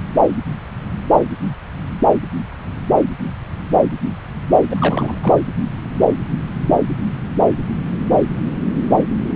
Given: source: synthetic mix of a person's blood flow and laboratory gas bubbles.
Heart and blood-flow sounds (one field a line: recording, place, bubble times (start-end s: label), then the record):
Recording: Doppler ultrasound of blood flow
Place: subclavian vein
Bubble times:
4.69-5.17 s: bubbles
5.23-5.37 s: bubbles
From the record:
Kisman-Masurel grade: 212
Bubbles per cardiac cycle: several, 3 to 8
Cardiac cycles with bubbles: 1 to 10%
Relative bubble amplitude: moderate (0.250 to 0.450)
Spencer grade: 1 (occasional bubble signal discernible with the cardiac motion signal, with majority of cardiac periods free of bubbles)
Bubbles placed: anywhere in the cardiac cycle